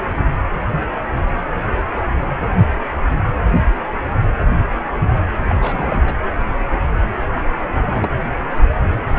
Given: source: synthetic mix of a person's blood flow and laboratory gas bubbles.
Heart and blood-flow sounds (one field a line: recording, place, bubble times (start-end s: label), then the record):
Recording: Doppler ultrasound of blood flow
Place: precordium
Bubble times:
5.47-6.00 s: bubbles
6.05-6.15 s: bubbles
7.72-8.15 s: bubbles
From the record:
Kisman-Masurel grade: 222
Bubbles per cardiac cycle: several, 3 to 8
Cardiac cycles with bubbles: 10 to 50%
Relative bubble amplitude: moderate (0.250 to 0.450)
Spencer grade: 2 (many but less than half of the cardiac periods contain bubble signals, singularly or in groups)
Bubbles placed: anywhere in the cardiac cycle